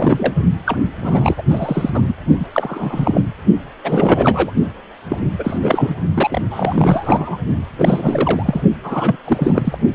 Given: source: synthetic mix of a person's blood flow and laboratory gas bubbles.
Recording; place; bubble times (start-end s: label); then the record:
Doppler ultrasound of blood flow; precordium
0.00-0.33 s: bubbles
0.65-0.77 s: bubbles
1.02-1.43 s: bubbles
1.50-1.90 s: bubbles
1.94-2.01 s: bubbles
2.07-2.14 s: bubbles
2.40-2.45 s: bubbles
2.52-3.21 s: bubbles
3.83-4.51 s: bubbles
5.09-5.18 s: bubbles
5.39-5.59 s: bubbles
5.62-5.94 s: bubbles
6.14-6.42 s: bubbles
6.51-7.38 s: bubbles
7.78-8.62 s: bubbles
8.84-9.17 s: bubbles
9.25-9.78 s: bubbles
9.92-9.95 s: bubbles
From the record:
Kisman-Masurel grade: 343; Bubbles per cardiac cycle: rolling drumbeat, 9 or more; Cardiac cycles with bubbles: 100%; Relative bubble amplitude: loud (0.450 to 0.775); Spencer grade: 3 (all of the cardiac periods contain showers or single bubble signals, but not dominating or overriding the cardiac motion signals); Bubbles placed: only in the low amplitude regions of the cardiac cycle